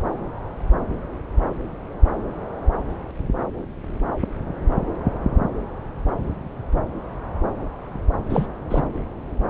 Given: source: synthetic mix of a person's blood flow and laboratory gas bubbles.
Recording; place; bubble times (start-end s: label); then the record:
Doppler ultrasound of blood flow; subclavian vein
8.29-8.47 s: bubbles
8.70-8.83 s: bubbles
From the record:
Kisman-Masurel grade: 212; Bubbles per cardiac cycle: several, 3 to 8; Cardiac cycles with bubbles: 1 to 10%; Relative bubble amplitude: moderate (0.250 to 0.450); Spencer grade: 1 (occasional bubble signal discernible with the cardiac motion signal, with majority of cardiac periods free of bubbles); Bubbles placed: anywhere in the cardiac cycle